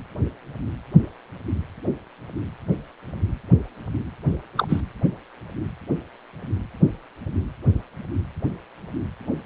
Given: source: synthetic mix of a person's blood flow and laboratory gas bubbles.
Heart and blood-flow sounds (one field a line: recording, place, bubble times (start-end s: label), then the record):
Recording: Doppler ultrasound of blood flow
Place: precordium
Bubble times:
4.57-4.81 s: bubbles
From the record:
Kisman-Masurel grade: 112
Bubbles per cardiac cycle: 1 to 2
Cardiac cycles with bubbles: 1 to 10%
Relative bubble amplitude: moderate (0.250 to 0.450)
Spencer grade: 1 (occasional bubble signal discernible with the cardiac motion signal, with majority of cardiac periods free of bubbles)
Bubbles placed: anywhere in the cardiac cycle